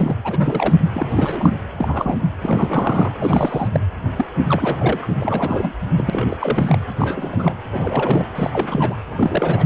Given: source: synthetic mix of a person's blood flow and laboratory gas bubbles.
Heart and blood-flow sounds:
Doppler ultrasound of blood flow; precordium
0.00-0.15 s: bubbles
0.24-0.74 s: bubbles
0.92-1.57 s: bubbles
1.77-2.25 s: bubbles
2.41-3.14 s: bubbles
3.19-3.68 s: bubbles
3.73-3.80 s: bubbles
4.16-4.26 s: bubbles
4.46-5.06 s: bubbles
5.21-5.73 s: bubbles
5.96-6.78 s: bubbles
6.98-7.54 s: bubbles
7.71-8.27 s: bubbles
8.35-8.50 s: bubbles
8.53-8.96 s: bubbles
9.11-9.66 s: bubbles
From the record:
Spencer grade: 3 (all of the cardiac periods contain showers or single bubble signals, but not dominating or overriding the cardiac motion signals); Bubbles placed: anywhere in the cardiac cycle

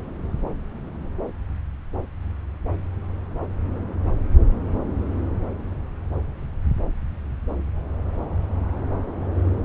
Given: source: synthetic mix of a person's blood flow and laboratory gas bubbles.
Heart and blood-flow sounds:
Doppler ultrasound of blood flow; subclavian vein
no bubbles
From the record:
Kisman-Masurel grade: 000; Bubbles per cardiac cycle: 0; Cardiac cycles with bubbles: 0%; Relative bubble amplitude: no bubbles discernible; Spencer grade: 0 (complete lack of bubble signals)

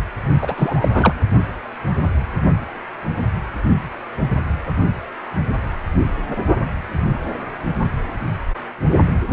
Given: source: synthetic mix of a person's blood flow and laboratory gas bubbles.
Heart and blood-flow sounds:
Doppler ultrasound of blood flow; precordium
0.42-0.89 s: bubbles
0.93-1.14 s: bubbles
From the record:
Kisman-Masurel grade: 213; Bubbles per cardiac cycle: several, 3 to 8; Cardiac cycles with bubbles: 1 to 10%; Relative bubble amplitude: loud (0.450 to 0.775); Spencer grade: 1 (occasional bubble signal discernible with the cardiac motion signal, with majority of cardiac periods free of bubbles); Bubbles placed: only in the low amplitude regions of the cardiac cycle

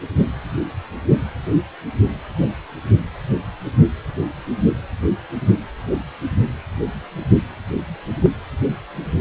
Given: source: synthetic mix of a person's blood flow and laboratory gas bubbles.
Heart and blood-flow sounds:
Doppler ultrasound of blood flow; precordium
8.22-8.29 s: bubbles
From the record:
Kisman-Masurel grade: 112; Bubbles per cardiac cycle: 1 to 2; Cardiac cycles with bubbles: 1 to 10%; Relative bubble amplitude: moderate (0.250 to 0.450); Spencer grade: 1 (occasional bubble signal discernible with the cardiac motion signal, with majority of cardiac periods free of bubbles); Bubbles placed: anywhere in the cardiac cycle

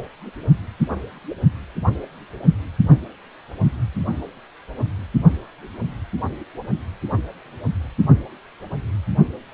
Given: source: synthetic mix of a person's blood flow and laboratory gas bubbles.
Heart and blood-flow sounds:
Doppler ultrasound of blood flow; precordium
0.00-0.02 s: bubbles
From the record:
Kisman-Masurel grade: 122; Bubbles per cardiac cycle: 1 to 2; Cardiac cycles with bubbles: 10 to 50%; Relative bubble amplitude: moderate (0.250 to 0.450); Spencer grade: 2 (many but less than half of the cardiac periods contain bubble signals, singularly or in groups); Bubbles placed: only in the low amplitude regions of the cardiac cycle

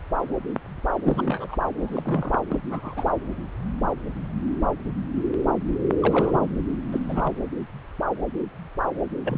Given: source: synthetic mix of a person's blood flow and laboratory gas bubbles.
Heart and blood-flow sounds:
Doppler ultrasound of blood flow; subclavian vein
1.02-1.56 s: bubbles
1.81-2.39 s: bubbles
2.50-2.59 s: bubbles
2.70-3.11 s: bubbles
6.02-6.48 s: bubbles
6.92-7.38 s: bubbles
9.24-9.38 s: bubbles
From the record:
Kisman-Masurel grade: 221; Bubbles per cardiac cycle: several, 3 to 8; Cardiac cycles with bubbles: 10 to 50%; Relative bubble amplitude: barely perceptible (0.100 to 0.250); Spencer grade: 2 (many but less than half of the cardiac periods contain bubble signals, singularly or in groups); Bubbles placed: anywhere in the cardiac cycle

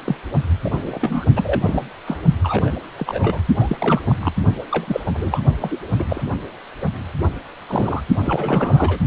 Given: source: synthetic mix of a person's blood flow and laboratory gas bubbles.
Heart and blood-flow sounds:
Doppler ultrasound of blood flow; precordium
0.05-0.16 s: bubbles
0.64-1.25 s: bubbles
1.35-1.90 s: bubbles
2.06-2.18 s: bubbles
2.43-2.71 s: bubbles
2.97-3.41 s: bubbles
3.58-3.77 s: bubbles
3.81-4.01 s: bubbles
4.09-4.15 s: bubbles
4.20-4.32 s: bubbles
4.59-4.65 s: bubbles
4.71-5.01 s: bubbles
5.06-5.10 s: bubbles
5.13-5.40 s: bubbles
5.61-5.79 s: bubbles
5.97-6.04 s: bubbles
6.09-6.23 s: bubbles
7.68-8.01 s: bubbles
8.23-8.99 s: bubbles
From the record:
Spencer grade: 3 (all of the cardiac periods contain showers or single bubble signals, but not dominating or overriding the cardiac motion signals); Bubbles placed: only in the low amplitude regions of the cardiac cycle

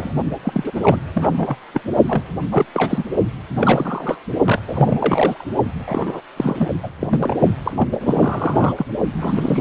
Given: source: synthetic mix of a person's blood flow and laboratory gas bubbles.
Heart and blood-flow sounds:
Doppler ultrasound of blood flow; precordium
0.00-0.12 s: bubbles
0.45-0.72 s: bubbles
0.75-0.97 s: bubbles
1.13-1.31 s: bubbles
1.37-1.56 s: bubbles
1.74-1.81 s: bubbles
2.06-2.22 s: bubbles
2.51-2.65 s: bubbles
2.73-3.03 s: bubbles
3.56-4.17 s: bubbles
4.45-4.61 s: bubbles
4.68-5.47 s: bubbles
5.77-6.21 s: bubbles
6.36-6.69 s: bubbles
6.83-6.90 s: bubbles
7.00-7.07 s: bubbles
7.10-7.36 s: bubbles
7.62-7.88 s: bubbles
7.92-7.97 s: bubbles
8.00-8.73 s: bubbles
8.77-8.86 s: bubbles
9.19-9.61 s: bubbles
From the record:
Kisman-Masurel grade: 342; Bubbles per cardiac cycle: rolling drumbeat, 9 or more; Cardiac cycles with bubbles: 100%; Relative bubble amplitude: moderate (0.250 to 0.450); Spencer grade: 3 (all of the cardiac periods contain showers or single bubble signals, but not dominating or overriding the cardiac motion signals); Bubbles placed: only in the low amplitude regions of the cardiac cycle

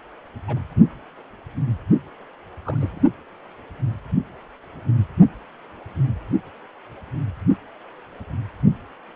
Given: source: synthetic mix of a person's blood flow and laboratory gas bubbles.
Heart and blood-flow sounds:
Doppler ultrasound of blood flow; precordium
0.48-0.59 s: bubbles
2.61-3.00 s: bubbles
From the record:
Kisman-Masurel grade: 121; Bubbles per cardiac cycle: 1 to 2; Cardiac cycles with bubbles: 10 to 50%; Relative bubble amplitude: barely perceptible (0.100 to 0.250); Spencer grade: 2 (many but less than half of the cardiac periods contain bubble signals, singularly or in groups); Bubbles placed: only in the low amplitude regions of the cardiac cycle

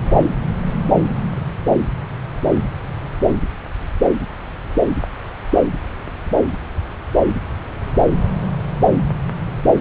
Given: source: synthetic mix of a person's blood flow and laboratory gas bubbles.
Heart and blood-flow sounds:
Doppler ultrasound of blood flow; subclavian vein
0.00-0.24 s: bubbles
From the record:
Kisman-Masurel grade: 211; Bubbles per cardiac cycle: several, 3 to 8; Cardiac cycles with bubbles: 1 to 10%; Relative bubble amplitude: barely perceptible (0.100 to 0.250); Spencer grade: 1 (occasional bubble signal discernible with the cardiac motion signal, with majority of cardiac periods free of bubbles); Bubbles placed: anywhere in the cardiac cycle

